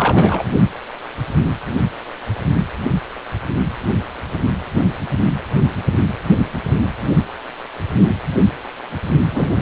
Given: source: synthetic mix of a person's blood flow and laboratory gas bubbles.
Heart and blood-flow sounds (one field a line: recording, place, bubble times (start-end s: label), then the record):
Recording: Doppler ultrasound of blood flow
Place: precordium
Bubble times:
0.00-0.43 s: bubbles
9.31-9.61 s: bubbles
From the record:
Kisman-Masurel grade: 123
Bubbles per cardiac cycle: 1 to 2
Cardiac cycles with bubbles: 10 to 50%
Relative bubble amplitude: loud (0.450 to 0.775)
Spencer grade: 2 (many but less than half of the cardiac periods contain bubble signals, singularly or in groups)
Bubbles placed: anywhere in the cardiac cycle